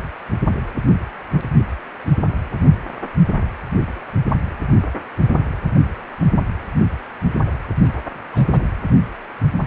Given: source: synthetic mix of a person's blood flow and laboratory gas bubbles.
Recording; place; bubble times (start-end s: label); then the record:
Doppler ultrasound of blood flow; precordium
7.81-7.91 s: bubbles
8.32-8.63 s: bubbles
From the record:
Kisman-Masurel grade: 111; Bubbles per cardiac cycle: 1 to 2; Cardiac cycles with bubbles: 1 to 10%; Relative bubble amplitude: barely perceptible (0.100 to 0.250); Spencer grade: 1 (occasional bubble signal discernible with the cardiac motion signal, with majority of cardiac periods free of bubbles); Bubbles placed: anywhere in the cardiac cycle